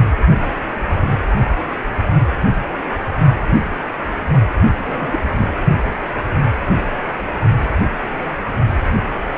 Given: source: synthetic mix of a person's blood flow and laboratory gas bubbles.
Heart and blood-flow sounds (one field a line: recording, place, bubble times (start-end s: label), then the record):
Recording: Doppler ultrasound of blood flow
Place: precordium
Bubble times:
4.87-5.20 s: bubbles
5.31-5.49 s: bubbles
From the record:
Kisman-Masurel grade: 211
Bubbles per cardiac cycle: several, 3 to 8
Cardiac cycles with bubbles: 1 to 10%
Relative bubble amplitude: barely perceptible (0.100 to 0.250)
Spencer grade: 1 (occasional bubble signal discernible with the cardiac motion signal, with majority of cardiac periods free of bubbles)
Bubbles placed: only in the low amplitude regions of the cardiac cycle